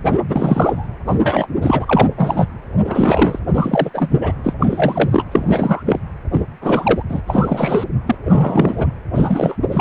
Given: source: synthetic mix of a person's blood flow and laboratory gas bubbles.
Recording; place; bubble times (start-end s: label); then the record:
Doppler ultrasound of blood flow; precordium
0.08-0.19 s: bubbles
0.28-0.88 s: bubbles
1.06-1.47 s: bubbles
1.61-2.08 s: bubbles
2.17-2.46 s: bubbles
2.84-3.40 s: bubbles
3.53-3.90 s: bubbles
3.94-4.32 s: bubbles
4.44-4.53 s: bubbles
4.60-5.26 s: bubbles
5.32-6.00 s: bubbles
6.33-6.42 s: bubbles
6.61-7.03 s: bubbles
7.09-7.21 s: bubbles
7.27-7.85 s: bubbles
8.07-8.15 s: bubbles
8.25-8.93 s: bubbles
9.14-9.58 s: bubbles
9.71-9.81 s: bubbles
From the record:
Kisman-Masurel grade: 343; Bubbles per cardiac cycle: rolling drumbeat, 9 or more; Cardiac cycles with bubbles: 100%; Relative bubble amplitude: loud (0.450 to 0.775); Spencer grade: 3 (all of the cardiac periods contain showers or single bubble signals, but not dominating or overriding the cardiac motion signals); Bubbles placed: anywhere in the cardiac cycle